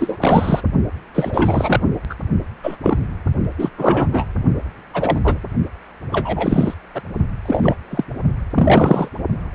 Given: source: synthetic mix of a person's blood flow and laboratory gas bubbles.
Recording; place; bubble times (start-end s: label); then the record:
Doppler ultrasound of blood flow; precordium
0.00-0.17 s: bubbles
0.20-0.61 s: bubbles
1.15-1.80 s: bubbles
2.09-2.15 s: bubbles
2.63-2.76 s: bubbles
2.83-2.97 s: bubbles
3.58-3.70 s: bubbles
3.77-4.08 s: bubbles
4.12-4.25 s: bubbles
4.93-5.21 s: bubbles
5.24-5.39 s: bubbles
6.12-6.74 s: bubbles
6.94-7.01 s: bubbles
7.45-7.77 s: bubbles
7.90-8.04 s: bubbles
8.55-9.09 s: bubbles
From the record:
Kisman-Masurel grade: 243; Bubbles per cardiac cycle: several, 3 to 8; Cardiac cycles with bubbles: 100%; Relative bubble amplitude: loud (0.450 to 0.775); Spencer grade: 3 (all of the cardiac periods contain showers or single bubble signals, but not dominating or overriding the cardiac motion signals); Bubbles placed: only in the low amplitude regions of the cardiac cycle